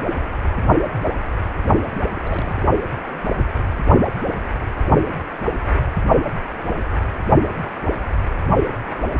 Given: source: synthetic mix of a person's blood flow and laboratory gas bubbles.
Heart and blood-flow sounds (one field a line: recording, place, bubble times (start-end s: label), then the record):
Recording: Doppler ultrasound of blood flow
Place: precordium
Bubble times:
1.83-1.87 s: bubbles
2.15-2.20 s: bubbles
2.23-2.62 s: bubbles
From the record:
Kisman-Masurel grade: 211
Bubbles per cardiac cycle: several, 3 to 8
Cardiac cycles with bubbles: 1 to 10%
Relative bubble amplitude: barely perceptible (0.100 to 0.250)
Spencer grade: 1 (occasional bubble signal discernible with the cardiac motion signal, with majority of cardiac periods free of bubbles)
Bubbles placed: only in the low amplitude regions of the cardiac cycle